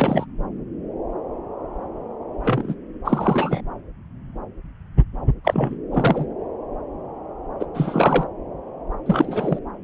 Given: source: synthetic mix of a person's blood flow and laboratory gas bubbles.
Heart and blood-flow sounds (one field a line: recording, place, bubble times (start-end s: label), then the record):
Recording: Doppler ultrasound of blood flow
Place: subclavian vein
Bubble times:
0.00-0.26 s: bubbles
2.44-2.75 s: bubbles
3.05-3.61 s: bubbles
5.45-5.76 s: bubbles
5.91-6.26 s: bubbles
7.60-7.66 s: bubbles
7.74-8.26 s: bubbles
9.06-9.59 s: bubbles
From the record:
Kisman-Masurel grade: 222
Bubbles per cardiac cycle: several, 3 to 8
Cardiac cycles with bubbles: 10 to 50%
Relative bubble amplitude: moderate (0.250 to 0.450)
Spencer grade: 2 (many but less than half of the cardiac periods contain bubble signals, singularly or in groups)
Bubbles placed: anywhere in the cardiac cycle